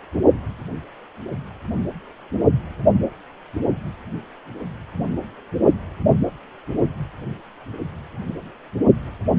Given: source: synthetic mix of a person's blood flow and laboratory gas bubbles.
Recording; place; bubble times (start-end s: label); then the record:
Doppler ultrasound of blood flow; precordium
no bubbles
From the record:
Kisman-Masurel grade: 000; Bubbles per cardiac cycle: 0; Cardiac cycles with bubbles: 0%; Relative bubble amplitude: no bubbles discernible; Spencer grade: 0 (complete lack of bubble signals)